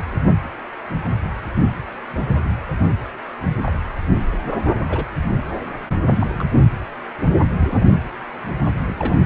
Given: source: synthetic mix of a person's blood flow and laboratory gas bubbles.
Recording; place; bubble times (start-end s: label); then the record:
Doppler ultrasound of blood flow; precordium
2.44-2.49 s: bubbles
3.66-3.73 s: bubbles
4.42-4.59 s: bubbles
4.89-5.06 s: bubbles
6.14-6.44 s: bubbles
7.59-7.88 s: bubbles
8.86-9.26 s: bubbles
From the record:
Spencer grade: 2 (many but less than half of the cardiac periods contain bubble signals, singularly or in groups); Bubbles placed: anywhere in the cardiac cycle